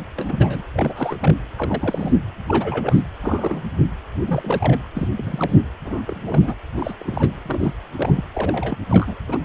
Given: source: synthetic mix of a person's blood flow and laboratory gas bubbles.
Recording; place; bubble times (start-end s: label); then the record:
Doppler ultrasound of blood flow; precordium
0.17-0.62 s: bubbles
0.74-1.34 s: bubbles
1.57-2.12 s: bubbles
2.46-3.04 s: bubbles
3.22-3.62 s: bubbles
4.27-4.87 s: bubbles
4.94-5.08 s: bubbles
5.15-5.62 s: bubbles
5.84-6.01 s: bubbles
6.07-6.54 s: bubbles
6.76-6.94 s: bubbles
7.00-7.42 s: bubbles
7.46-7.73 s: bubbles
7.97-8.24 s: bubbles
8.34-8.78 s: bubbles
8.90-9.15 s: bubbles
9.28-9.38 s: bubbles
9.43-9.45 s: bubbles
From the record:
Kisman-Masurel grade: 232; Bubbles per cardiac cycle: several, 3 to 8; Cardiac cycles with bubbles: 50 to 99%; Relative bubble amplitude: moderate (0.250 to 0.450); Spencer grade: 3 (all of the cardiac periods contain showers or single bubble signals, but not dominating or overriding the cardiac motion signals); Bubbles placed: anywhere in the cardiac cycle